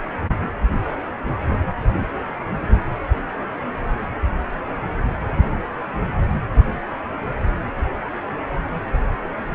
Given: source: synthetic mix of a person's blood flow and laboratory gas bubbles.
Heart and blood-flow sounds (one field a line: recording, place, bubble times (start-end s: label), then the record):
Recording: Doppler ultrasound of blood flow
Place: precordium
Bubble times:
5.36-5.52 s: bubbles
5.93-6.12 s: bubbles
From the record:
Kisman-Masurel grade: 111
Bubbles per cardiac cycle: 1 to 2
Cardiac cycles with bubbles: 1 to 10%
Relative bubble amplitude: barely perceptible (0.100 to 0.250)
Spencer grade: 1 (occasional bubble signal discernible with the cardiac motion signal, with majority of cardiac periods free of bubbles)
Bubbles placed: anywhere in the cardiac cycle